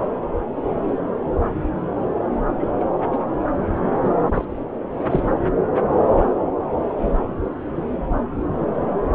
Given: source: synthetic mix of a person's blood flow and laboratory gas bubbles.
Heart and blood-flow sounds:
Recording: Doppler ultrasound of blood flow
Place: subclavian vein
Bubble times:
2.59-2.68 s: bubbles
2.80-2.84 s: bubbles
3.12-3.19 s: bubbles
4.04-4.09 s: bubbles
4.24-4.45 s: bubbles
5.10-5.23 s: bubbles
From the record:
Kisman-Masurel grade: 222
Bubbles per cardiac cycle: several, 3 to 8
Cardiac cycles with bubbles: 10 to 50%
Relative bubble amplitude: moderate (0.250 to 0.450)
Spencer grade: 2 (many but less than half of the cardiac periods contain bubble signals, singularly or in groups)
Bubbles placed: anywhere in the cardiac cycle

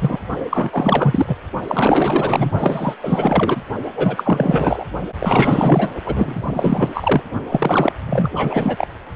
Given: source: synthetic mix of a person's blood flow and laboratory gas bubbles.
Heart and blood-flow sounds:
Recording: Doppler ultrasound of blood flow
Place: precordium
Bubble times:
0.00-0.19 s: bubbles
0.49-1.37 s: bubbles
1.68-2.52 s: bubbles
2.58-2.94 s: bubbles
3.02-3.61 s: bubbles
3.95-4.85 s: bubbles
5.19-5.89 s: bubbles
6.04-7.21 s: bubbles
7.49-7.92 s: bubbles
8.06-8.87 s: bubbles
From the record:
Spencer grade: 4 (maximum detectable bubble signal sounding continuously throughout systole and diastole of every cardiac period, and overriding the amplitude of the normal cardiac signals)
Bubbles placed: only in the low amplitude regions of the cardiac cycle

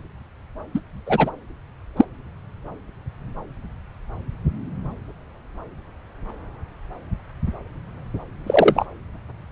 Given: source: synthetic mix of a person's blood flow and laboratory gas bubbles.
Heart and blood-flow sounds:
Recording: Doppler ultrasound of blood flow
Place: subclavian vein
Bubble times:
0.74-0.80 s: bubbles
1.06-1.31 s: bubbles
1.97-2.05 s: bubbles
8.46-8.86 s: bubbles
From the record:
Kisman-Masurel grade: 123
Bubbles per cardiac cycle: 1 to 2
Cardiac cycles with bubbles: 10 to 50%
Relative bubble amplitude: loud (0.450 to 0.775)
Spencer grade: 2 (many but less than half of the cardiac periods contain bubble signals, singularly or in groups)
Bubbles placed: anywhere in the cardiac cycle

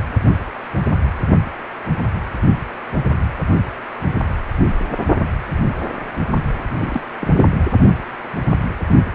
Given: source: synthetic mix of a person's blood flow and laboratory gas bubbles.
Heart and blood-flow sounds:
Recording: Doppler ultrasound of blood flow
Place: precordium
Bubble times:
6.74-7.00 s: bubbles
7.20-7.47 s: bubbles
From the record:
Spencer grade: 1 (occasional bubble signal discernible with the cardiac motion signal, with majority of cardiac periods free of bubbles)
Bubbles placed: only in the low amplitude regions of the cardiac cycle

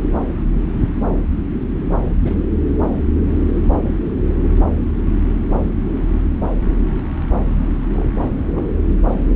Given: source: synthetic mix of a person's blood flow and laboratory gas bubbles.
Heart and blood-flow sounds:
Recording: Doppler ultrasound of blood flow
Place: subclavian vein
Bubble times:
2.23-2.42 s: bubbles
5.63-5.72 s: bubbles
5.97-6.06 s: bubbles
7.95-8.17 s: bubbles
8.32-8.70 s: bubbles
From the record:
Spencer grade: 2 (many but less than half of the cardiac periods contain bubble signals, singularly or in groups)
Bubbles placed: anywhere in the cardiac cycle

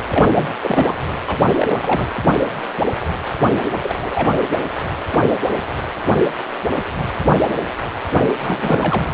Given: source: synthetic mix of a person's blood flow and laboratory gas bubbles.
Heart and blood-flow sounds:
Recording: Doppler ultrasound of blood flow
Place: precordium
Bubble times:
0.10-0.52 s: bubbles
0.62-0.94 s: bubbles
1.27-1.54 s: bubbles
1.58-2.08 s: bubbles
3.40-3.59 s: bubbles
3.72-3.95 s: bubbles
4.01-4.34 s: bubbles
8.39-9.05 s: bubbles
From the record:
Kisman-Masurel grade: 332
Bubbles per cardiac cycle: rolling drumbeat, 9 or more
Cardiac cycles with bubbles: 50 to 99%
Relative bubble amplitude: moderate (0.250 to 0.450)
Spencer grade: 3 (all of the cardiac periods contain showers or single bubble signals, but not dominating or overriding the cardiac motion signals)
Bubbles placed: anywhere in the cardiac cycle

